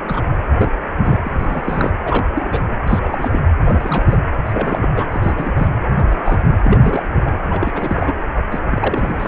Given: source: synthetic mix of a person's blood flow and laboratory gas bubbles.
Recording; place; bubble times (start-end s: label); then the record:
Doppler ultrasound of blood flow; precordium
0.08-0.22 s: bubbles
0.58-0.70 s: bubbles
0.98-1.19 s: bubbles
1.24-1.91 s: bubbles
2.04-2.25 s: bubbles
2.35-2.62 s: bubbles
2.88-3.00 s: bubbles
3.03-3.41 s: bubbles
3.63-4.17 s: bubbles
4.45-4.88 s: bubbles
4.96-5.05 s: bubbles
5.11-5.67 s: bubbles
5.96-6.40 s: bubbles
6.64-6.79 s: bubbles
6.81-7.03 s: bubbles
7.25-7.37 s: bubbles
7.50-8.12 s: bubbles
8.51-8.60 s: bubbles
8.69-9.28 s: bubbles
From the record:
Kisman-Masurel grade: 232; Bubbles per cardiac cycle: several, 3 to 8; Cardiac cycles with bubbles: 50 to 99%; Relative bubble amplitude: moderate (0.250 to 0.450); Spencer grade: 3 (all of the cardiac periods contain showers or single bubble signals, but not dominating or overriding the cardiac motion signals); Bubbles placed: anywhere in the cardiac cycle